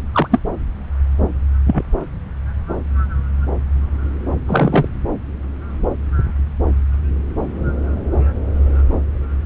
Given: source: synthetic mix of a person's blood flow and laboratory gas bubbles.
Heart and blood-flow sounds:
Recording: Doppler ultrasound of blood flow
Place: subclavian vein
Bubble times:
0.12-0.28 s: bubbles
0.31-0.39 s: bubbles
1.67-1.82 s: bubbles
4.46-4.88 s: bubbles
From the record:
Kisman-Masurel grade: 123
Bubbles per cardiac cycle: 1 to 2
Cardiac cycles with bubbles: 10 to 50%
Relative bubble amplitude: loud (0.450 to 0.775)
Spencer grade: 2 (many but less than half of the cardiac periods contain bubble signals, singularly or in groups)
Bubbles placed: anywhere in the cardiac cycle

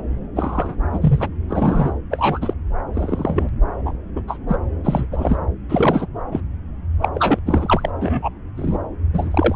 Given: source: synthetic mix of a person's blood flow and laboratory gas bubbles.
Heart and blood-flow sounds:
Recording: Doppler ultrasound of blood flow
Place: subclavian vein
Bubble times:
0.35-0.76 s: bubbles
0.92-1.28 s: bubbles
1.49-1.93 s: bubbles
2.10-2.53 s: bubbles
2.93-3.49 s: bubbles
3.85-3.92 s: bubbles
4.15-4.23 s: bubbles
4.27-4.38 s: bubbles
4.48-4.58 s: bubbles
4.84-5.06 s: bubbles
5.11-5.39 s: bubbles
5.69-6.06 s: bubbles
6.32-6.40 s: bubbles
7.01-7.09 s: bubbles
7.14-7.39 s: bubbles
7.46-7.91 s: bubbles
8.01-8.29 s: bubbles
8.56-8.78 s: bubbles
9.13-9.55 s: bubbles
From the record:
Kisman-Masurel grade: 243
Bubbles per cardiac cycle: several, 3 to 8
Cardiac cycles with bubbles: 100%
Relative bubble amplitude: loud (0.450 to 0.775)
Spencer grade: 3 (all of the cardiac periods contain showers or single bubble signals, but not dominating or overriding the cardiac motion signals)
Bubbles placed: anywhere in the cardiac cycle

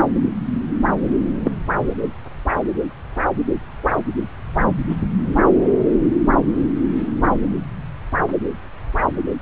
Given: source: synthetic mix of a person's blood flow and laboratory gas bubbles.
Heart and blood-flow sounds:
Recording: Doppler ultrasound of blood flow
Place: subclavian vein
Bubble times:
1.44-1.51 s: bubbles
From the record:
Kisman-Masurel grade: 113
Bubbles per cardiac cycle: 1 to 2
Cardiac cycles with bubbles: 1 to 10%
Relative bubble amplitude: loud (0.450 to 0.775)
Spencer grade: 1 (occasional bubble signal discernible with the cardiac motion signal, with majority of cardiac periods free of bubbles)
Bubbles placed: anywhere in the cardiac cycle

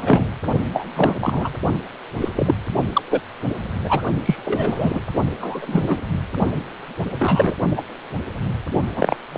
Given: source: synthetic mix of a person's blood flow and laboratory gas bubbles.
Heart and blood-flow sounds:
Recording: Doppler ultrasound of blood flow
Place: precordium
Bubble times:
0.00-0.28 s: bubbles
0.74-0.86 s: bubbles
0.96-1.17 s: bubbles
1.20-1.50 s: bubbles
2.21-2.29 s: bubbles
2.35-2.54 s: bubbles
2.93-3.02 s: bubbles
3.10-3.21 s: bubbles
3.84-4.02 s: bubbles
4.25-4.35 s: bubbles
4.44-5.04 s: bubbles
5.40-5.97 s: bubbles
7.18-7.55 s: bubbles
7.75-7.83 s: bubbles
8.96-9.17 s: bubbles
9.33-9.38 s: bubbles
From the record:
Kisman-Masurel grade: 243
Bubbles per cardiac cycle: several, 3 to 8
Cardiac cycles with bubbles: 100%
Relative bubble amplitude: loud (0.450 to 0.775)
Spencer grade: 3 (all of the cardiac periods contain showers or single bubble signals, but not dominating or overriding the cardiac motion signals)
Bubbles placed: only in the low amplitude regions of the cardiac cycle

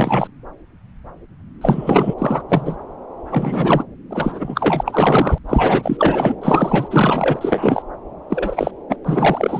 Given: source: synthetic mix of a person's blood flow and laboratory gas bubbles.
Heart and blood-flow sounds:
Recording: Doppler ultrasound of blood flow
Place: subclavian vein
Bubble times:
0.00-0.27 s: bubbles
1.61-2.14 s: bubbles
2.18-2.42 s: bubbles
2.48-2.76 s: bubbles
3.30-3.84 s: bubbles
4.11-5.38 s: bubbles
5.48-6.36 s: bubbles
6.41-7.82 s: bubbles
8.29-8.71 s: bubbles
8.89-8.96 s: bubbles
9.04-9.60 s: bubbles
From the record:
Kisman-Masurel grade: 333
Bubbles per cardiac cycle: rolling drumbeat, 9 or more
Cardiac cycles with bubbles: 50 to 99%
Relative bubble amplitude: loud (0.450 to 0.775)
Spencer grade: 3 (all of the cardiac periods contain showers or single bubble signals, but not dominating or overriding the cardiac motion signals)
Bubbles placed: anywhere in the cardiac cycle

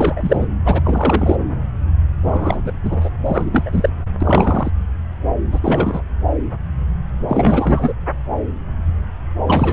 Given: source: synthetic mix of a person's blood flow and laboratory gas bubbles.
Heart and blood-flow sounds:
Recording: Doppler ultrasound of blood flow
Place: subclavian vein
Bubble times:
0.00-0.46 s: bubbles
0.65-0.81 s: bubbles
0.84-1.36 s: bubbles
2.25-2.60 s: bubbles
2.65-2.73 s: bubbles
2.83-3.10 s: bubbles
3.25-3.90 s: bubbles
4.21-4.71 s: bubbles
5.51-6.02 s: bubbles
7.28-7.92 s: bubbles
9.47-9.73 s: bubbles
From the record:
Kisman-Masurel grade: 333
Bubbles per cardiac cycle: rolling drumbeat, 9 or more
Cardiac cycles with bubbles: 50 to 99%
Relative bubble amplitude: loud (0.450 to 0.775)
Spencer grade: 3 (all of the cardiac periods contain showers or single bubble signals, but not dominating or overriding the cardiac motion signals)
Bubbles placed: anywhere in the cardiac cycle

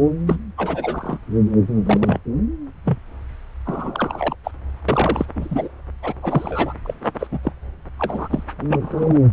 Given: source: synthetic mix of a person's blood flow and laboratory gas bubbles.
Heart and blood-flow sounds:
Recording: Doppler ultrasound of blood flow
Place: subclavian vein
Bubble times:
0.27-0.36 s: bubbles
0.57-1.19 s: bubbles
1.85-2.19 s: bubbles
2.85-2.98 s: bubbles
3.65-4.35 s: bubbles
4.44-4.51 s: bubbles
4.88-5.25 s: bubbles
5.36-5.69 s: bubbles
6.03-6.14 s: bubbles
6.21-6.75 s: bubbles
6.83-6.94 s: bubbles
7.19-7.27 s: bubbles
7.32-7.39 s: bubbles
7.43-7.53 s: bubbles
7.99-8.43 s: bubbles
8.68-9.16 s: bubbles
From the record:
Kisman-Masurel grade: 232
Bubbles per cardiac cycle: several, 3 to 8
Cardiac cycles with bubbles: 50 to 99%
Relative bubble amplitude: moderate (0.250 to 0.450)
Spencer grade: 3 (all of the cardiac periods contain showers or single bubble signals, but not dominating or overriding the cardiac motion signals)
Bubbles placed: anywhere in the cardiac cycle

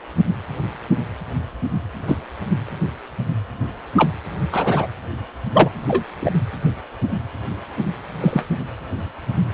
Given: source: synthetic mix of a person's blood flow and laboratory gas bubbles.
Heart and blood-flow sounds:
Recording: Doppler ultrasound of blood flow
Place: precordium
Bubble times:
2.06-2.20 s: bubbles
3.96-4.10 s: bubbles
4.51-4.88 s: bubbles
5.53-5.70 s: bubbles
5.88-6.04 s: bubbles
6.21-6.33 s: bubbles
8.20-8.43 s: bubbles
From the record:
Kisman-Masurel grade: 123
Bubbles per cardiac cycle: 1 to 2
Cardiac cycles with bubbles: 10 to 50%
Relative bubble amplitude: loud (0.450 to 0.775)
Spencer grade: 2 (many but less than half of the cardiac periods contain bubble signals, singularly or in groups)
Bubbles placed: anywhere in the cardiac cycle

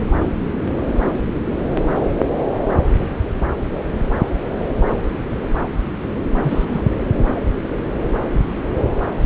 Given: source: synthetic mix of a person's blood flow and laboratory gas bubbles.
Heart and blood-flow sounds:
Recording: Doppler ultrasound of blood flow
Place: subclavian vein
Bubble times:
6.42-6.84 s: bubbles
From the record:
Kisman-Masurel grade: 222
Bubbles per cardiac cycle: several, 3 to 8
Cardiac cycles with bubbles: 10 to 50%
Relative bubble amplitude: moderate (0.250 to 0.450)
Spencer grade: 2 (many but less than half of the cardiac periods contain bubble signals, singularly or in groups)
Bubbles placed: anywhere in the cardiac cycle

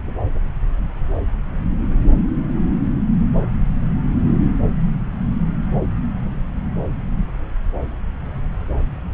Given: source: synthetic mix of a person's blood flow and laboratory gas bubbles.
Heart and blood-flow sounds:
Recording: Doppler ultrasound of blood flow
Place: subclavian vein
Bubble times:
no bubbles
From the record:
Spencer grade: 0 (complete lack of bubble signals)

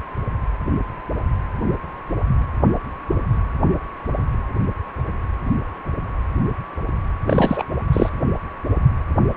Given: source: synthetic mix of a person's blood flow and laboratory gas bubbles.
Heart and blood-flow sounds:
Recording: Doppler ultrasound of blood flow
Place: precordium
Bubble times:
7.26-7.64 s: bubbles
7.92-8.10 s: bubbles
From the record:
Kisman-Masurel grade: 223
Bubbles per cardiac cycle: several, 3 to 8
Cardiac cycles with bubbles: 10 to 50%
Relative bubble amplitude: loud (0.450 to 0.775)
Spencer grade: 2 (many but less than half of the cardiac periods contain bubble signals, singularly or in groups)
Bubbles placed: anywhere in the cardiac cycle

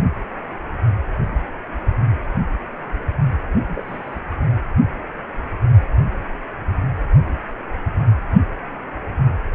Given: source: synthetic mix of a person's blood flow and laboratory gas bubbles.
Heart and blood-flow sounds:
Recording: Doppler ultrasound of blood flow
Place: precordium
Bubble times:
3.67-4.20 s: bubbles
From the record:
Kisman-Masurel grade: 221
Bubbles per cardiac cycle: several, 3 to 8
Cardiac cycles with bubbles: 10 to 50%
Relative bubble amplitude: barely perceptible (0.100 to 0.250)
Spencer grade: 2 (many but less than half of the cardiac periods contain bubble signals, singularly or in groups)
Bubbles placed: only in the low amplitude regions of the cardiac cycle

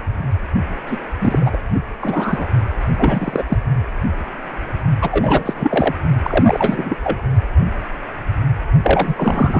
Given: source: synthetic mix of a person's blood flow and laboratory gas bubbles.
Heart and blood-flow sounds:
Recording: Doppler ultrasound of blood flow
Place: precordium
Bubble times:
0.86-0.99 s: bubbles
1.20-1.58 s: bubbles
1.74-1.79 s: bubbles
2.01-2.48 s: bubbles
2.98-3.44 s: bubbles
3.48-3.58 s: bubbles
5.01-5.94 s: bubbles
6.22-6.95 s: bubbles
7.02-7.21 s: bubbles
8.83-9.60 s: bubbles
From the record:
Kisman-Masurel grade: 333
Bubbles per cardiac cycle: rolling drumbeat, 9 or more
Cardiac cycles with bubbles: 50 to 99%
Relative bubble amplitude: loud (0.450 to 0.775)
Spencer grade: 3 (all of the cardiac periods contain showers or single bubble signals, but not dominating or overriding the cardiac motion signals)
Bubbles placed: only in the low amplitude regions of the cardiac cycle

